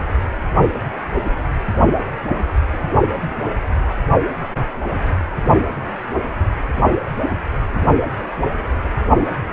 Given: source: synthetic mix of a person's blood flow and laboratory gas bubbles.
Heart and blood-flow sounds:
Doppler ultrasound of blood flow; precordium
no bubbles
From the record:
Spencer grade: 0 (complete lack of bubble signals)

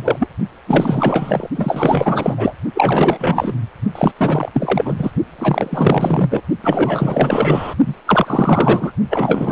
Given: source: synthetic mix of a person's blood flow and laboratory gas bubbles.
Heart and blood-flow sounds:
Doppler ultrasound of blood flow; precordium
0.00-0.28 s: bubbles
0.66-1.50 s: bubbles
1.55-2.54 s: bubbles
2.74-3.54 s: bubbles
3.95-4.12 s: bubbles
4.17-4.49 s: bubbles
4.53-5.11 s: bubbles
5.38-6.43 s: bubbles
6.64-7.74 s: bubbles
7.85-7.94 s: bubbles
8.07-8.93 s: bubbles
9.10-9.52 s: bubbles
From the record:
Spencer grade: 4 (maximum detectable bubble signal sounding continuously throughout systole and diastole of every cardiac period, and overriding the amplitude of the normal cardiac signals); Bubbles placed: only in the low amplitude regions of the cardiac cycle

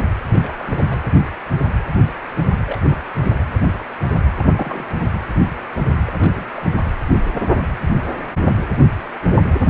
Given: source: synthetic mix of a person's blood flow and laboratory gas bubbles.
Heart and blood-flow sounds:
Doppler ultrasound of blood flow; precordium
0.33-0.52 s: bubbles
0.57-0.98 s: bubbles
2.67-2.78 s: bubbles
2.82-2.95 s: bubbles
3.18-3.42 s: bubbles
4.38-4.48 s: bubbles
4.54-4.85 s: bubbles
6.06-6.12 s: bubbles
6.17-6.49 s: bubbles
6.55-6.76 s: bubbles
From the record:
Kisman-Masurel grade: 221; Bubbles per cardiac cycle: several, 3 to 8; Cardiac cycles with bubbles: 10 to 50%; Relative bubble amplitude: barely perceptible (0.100 to 0.250); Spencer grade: 2 (many but less than half of the cardiac periods contain bubble signals, singularly or in groups); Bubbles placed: anywhere in the cardiac cycle

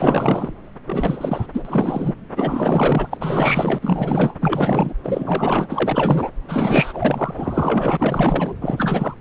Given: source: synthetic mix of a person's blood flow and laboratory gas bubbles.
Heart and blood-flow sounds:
Doppler ultrasound of blood flow; subclavian vein
0.00-0.53 s: bubbles
0.85-1.47 s: bubbles
1.53-2.13 s: bubbles
2.36-3.79 s: bubbles
3.82-4.35 s: bubbles
4.40-4.94 s: bubbles
5.04-6.29 s: bubbles
6.48-8.55 s: bubbles
8.60-9.14 s: bubbles
From the record:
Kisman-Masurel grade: 444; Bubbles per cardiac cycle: continuous sound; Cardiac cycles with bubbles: 100%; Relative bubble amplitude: maximal (0.775 to 0.999); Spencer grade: 4 (maximum detectable bubble signal sounding continuously throughout systole and diastole of every cardiac period, and overriding the amplitude of the normal cardiac signals); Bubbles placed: anywhere in the cardiac cycle

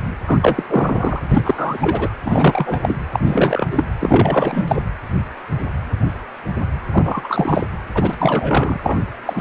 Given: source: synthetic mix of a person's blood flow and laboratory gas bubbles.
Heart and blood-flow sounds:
Doppler ultrasound of blood flow; precordium
0.26-0.39 s: bubbles
0.41-0.65 s: bubbles
0.69-1.20 s: bubbles
1.30-2.09 s: bubbles
2.24-2.80 s: bubbles
2.83-2.97 s: bubbles
3.12-3.19 s: bubbles
3.26-3.68 s: bubbles
3.71-3.84 s: bubbles
4.00-4.64 s: bubbles
4.67-4.83 s: bubbles
6.92-7.67 s: bubbles
7.94-8.16 s: bubbles
8.19-8.97 s: bubbles
9.25-9.41 s: bubbles
From the record:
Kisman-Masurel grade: 333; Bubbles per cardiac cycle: rolling drumbeat, 9 or more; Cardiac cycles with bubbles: 50 to 99%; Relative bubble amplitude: loud (0.450 to 0.775); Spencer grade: 3 (all of the cardiac periods contain showers or single bubble signals, but not dominating or overriding the cardiac motion signals); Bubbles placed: anywhere in the cardiac cycle

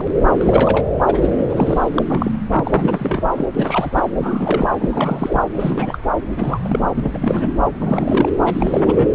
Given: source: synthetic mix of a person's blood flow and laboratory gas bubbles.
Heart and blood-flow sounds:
Doppler ultrasound of blood flow; subclavian vein
0.00-0.09 s: bubbles
0.33-0.84 s: bubbles
1.07-1.28 s: bubbles
1.49-1.90 s: bubbles
1.96-2.02 s: bubbles
2.09-2.35 s: bubbles
2.52-3.47 s: bubbles
3.54-3.91 s: bubbles
3.93-4.01 s: bubbles
4.19-4.70 s: bubbles
4.79-4.90 s: bubbles
4.92-5.45 s: bubbles
5.54-5.98 s: bubbles
6.36-6.58 s: bubbles
6.64-6.79 s: bubbles
6.95-7.18 s: bubbles
7.21-7.52 s: bubbles
7.80-8.29 s: bubbles
8.46-9.06 s: bubbles
From the record:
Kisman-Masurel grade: 342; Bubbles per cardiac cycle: rolling drumbeat, 9 or more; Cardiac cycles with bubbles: 100%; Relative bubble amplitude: moderate (0.250 to 0.450); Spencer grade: 3 (all of the cardiac periods contain showers or single bubble signals, but not dominating or overriding the cardiac motion signals); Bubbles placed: anywhere in the cardiac cycle

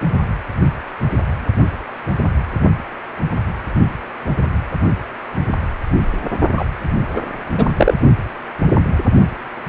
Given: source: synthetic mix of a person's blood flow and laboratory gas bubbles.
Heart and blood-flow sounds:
Doppler ultrasound of blood flow; precordium
6.56-6.65 s: bubbles
7.15-7.21 s: bubbles
7.56-7.67 s: bubbles
7.76-7.94 s: bubbles
From the record:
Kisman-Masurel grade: 213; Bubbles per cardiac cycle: several, 3 to 8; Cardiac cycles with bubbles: 1 to 10%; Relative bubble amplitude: loud (0.450 to 0.775); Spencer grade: 1 (occasional bubble signal discernible with the cardiac motion signal, with majority of cardiac periods free of bubbles); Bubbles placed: only in the low amplitude regions of the cardiac cycle

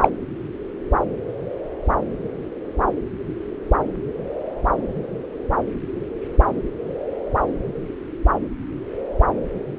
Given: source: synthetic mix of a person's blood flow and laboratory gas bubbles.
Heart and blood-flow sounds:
Doppler ultrasound of blood flow; subclavian vein
0.01-0.10 s: bubbles
From the record:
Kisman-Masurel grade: 213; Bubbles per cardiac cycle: several, 3 to 8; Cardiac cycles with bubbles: 1 to 10%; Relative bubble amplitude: loud (0.450 to 0.775); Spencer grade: 1 (occasional bubble signal discernible with the cardiac motion signal, with majority of cardiac periods free of bubbles); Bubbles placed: anywhere in the cardiac cycle

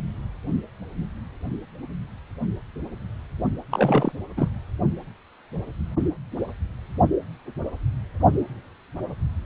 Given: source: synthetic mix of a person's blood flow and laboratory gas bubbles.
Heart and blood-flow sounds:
Doppler ultrasound of blood flow; precordium
3.71-4.12 s: bubbles
4.37-4.49 s: bubbles
From the record:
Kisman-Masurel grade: 222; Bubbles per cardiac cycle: several, 3 to 8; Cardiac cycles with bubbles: 10 to 50%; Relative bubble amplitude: moderate (0.250 to 0.450); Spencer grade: 2 (many but less than half of the cardiac periods contain bubble signals, singularly or in groups); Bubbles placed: only in the low amplitude regions of the cardiac cycle

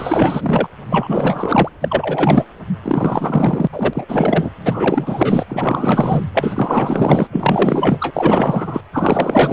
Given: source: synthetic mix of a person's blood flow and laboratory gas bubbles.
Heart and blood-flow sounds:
Doppler ultrasound of blood flow; precordium
0.00-0.68 s: bubbles
0.89-1.69 s: bubbles
1.81-2.45 s: bubbles
2.83-3.68 s: bubbles
3.73-4.05 s: bubbles
4.08-4.50 s: bubbles
4.64-5.44 s: bubbles
5.49-6.24 s: bubbles
6.33-7.27 s: bubbles
7.32-8.11 s: bubbles
8.13-8.81 s: bubbles
8.92-9.53 s: bubbles
From the record:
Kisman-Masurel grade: 444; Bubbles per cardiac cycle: continuous sound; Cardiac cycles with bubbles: 100%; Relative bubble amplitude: maximal (0.775 to 0.999); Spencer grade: 4 (maximum detectable bubble signal sounding continuously throughout systole and diastole of every cardiac period, and overriding the amplitude of the normal cardiac signals); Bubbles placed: anywhere in the cardiac cycle

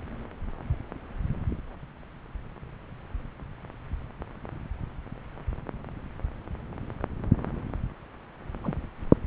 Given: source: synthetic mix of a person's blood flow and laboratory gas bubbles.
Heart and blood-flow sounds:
Doppler ultrasound of blood flow; subclavian vein
8.63-8.74 s: bubbles
From the record:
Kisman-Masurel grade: 111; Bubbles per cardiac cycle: 1 to 2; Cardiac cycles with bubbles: 1 to 10%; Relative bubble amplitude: barely perceptible (0.100 to 0.250); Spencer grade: 1 (occasional bubble signal discernible with the cardiac motion signal, with majority of cardiac periods free of bubbles); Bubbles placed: anywhere in the cardiac cycle

